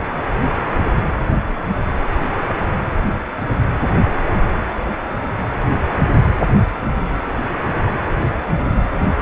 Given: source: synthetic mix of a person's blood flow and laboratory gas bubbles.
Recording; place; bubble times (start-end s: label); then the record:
Doppler ultrasound of blood flow; precordium
no bubbles
From the record:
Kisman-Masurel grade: 000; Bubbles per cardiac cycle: 0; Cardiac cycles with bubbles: 0%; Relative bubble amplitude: no bubbles discernible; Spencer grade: 0 (complete lack of bubble signals)